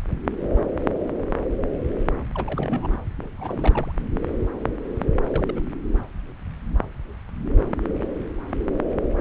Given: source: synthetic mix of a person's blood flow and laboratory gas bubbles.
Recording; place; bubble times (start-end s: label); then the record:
Doppler ultrasound of blood flow; subclavian vein
2.34-2.88 s: bubbles
3.21-3.28 s: bubbles
3.38-3.92 s: bubbles
5.28-5.61 s: bubbles
From the record:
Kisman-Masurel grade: 221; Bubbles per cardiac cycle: several, 3 to 8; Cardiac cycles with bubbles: 10 to 50%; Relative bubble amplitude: barely perceptible (0.100 to 0.250); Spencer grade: 2 (many but less than half of the cardiac periods contain bubble signals, singularly or in groups); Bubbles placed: anywhere in the cardiac cycle